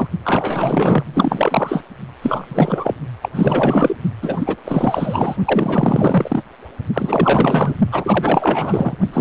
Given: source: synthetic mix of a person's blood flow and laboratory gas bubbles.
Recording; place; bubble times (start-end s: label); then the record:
Doppler ultrasound of blood flow; precordium
0.00-0.07 s: bubbles
0.24-1.04 s: bubbles
1.14-1.83 s: bubbles
2.22-2.95 s: bubbles
3.21-3.29 s: bubbles
3.34-3.95 s: bubbles
4.22-4.56 s: bubbles
4.64-5.36 s: bubbles
5.45-6.42 s: bubbles
6.93-7.76 s: bubbles
7.92-8.96 s: bubbles
9.13-9.21 s: bubbles
From the record:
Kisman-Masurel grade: 444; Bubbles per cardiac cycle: continuous sound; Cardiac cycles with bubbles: 100%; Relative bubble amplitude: maximal (0.775 to 0.999); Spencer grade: 4 (maximum detectable bubble signal sounding continuously throughout systole and diastole of every cardiac period, and overriding the amplitude of the normal cardiac signals); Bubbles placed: only in the low amplitude regions of the cardiac cycle